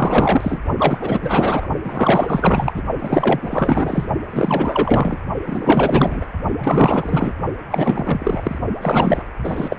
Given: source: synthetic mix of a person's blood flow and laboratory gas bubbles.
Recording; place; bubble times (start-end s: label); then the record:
Doppler ultrasound of blood flow; precordium
0.00-0.61 s: bubbles
0.78-1.67 s: bubbles
1.84-2.83 s: bubbles
2.99-4.07 s: bubbles
4.29-5.18 s: bubbles
5.46-6.26 s: bubbles
6.58-7.33 s: bubbles
7.71-8.59 s: bubbles
8.81-9.25 s: bubbles
9.44-9.77 s: bubbles
From the record:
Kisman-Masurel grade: 444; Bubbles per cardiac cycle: continuous sound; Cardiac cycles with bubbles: 100%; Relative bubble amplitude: maximal (0.775 to 0.999); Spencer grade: 4 (maximum detectable bubble signal sounding continuously throughout systole and diastole of every cardiac period, and overriding the amplitude of the normal cardiac signals); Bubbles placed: only in the low amplitude regions of the cardiac cycle